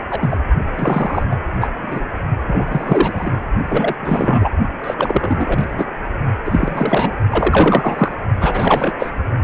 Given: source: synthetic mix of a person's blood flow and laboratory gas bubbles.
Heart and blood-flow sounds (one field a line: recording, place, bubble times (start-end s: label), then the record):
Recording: Doppler ultrasound of blood flow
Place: precordium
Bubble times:
0.09-0.37 s: bubbles
0.76-1.23 s: bubbles
1.30-1.35 s: bubbles
1.61-1.70 s: bubbles
1.82-2.08 s: bubbles
2.46-3.39 s: bubbles
3.68-3.96 s: bubbles
4.00-4.50 s: bubbles
4.83-4.94 s: bubbles
4.97-5.71 s: bubbles
5.77-5.88 s: bubbles
6.44-7.12 s: bubbles
7.29-8.15 s: bubbles
8.41-8.93 s: bubbles
8.99-9.12 s: bubbles
From the record:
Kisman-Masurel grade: 343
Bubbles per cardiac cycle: rolling drumbeat, 9 or more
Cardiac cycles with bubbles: 100%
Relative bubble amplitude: loud (0.450 to 0.775)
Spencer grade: 3 (all of the cardiac periods contain showers or single bubble signals, but not dominating or overriding the cardiac motion signals)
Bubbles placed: only in the low amplitude regions of the cardiac cycle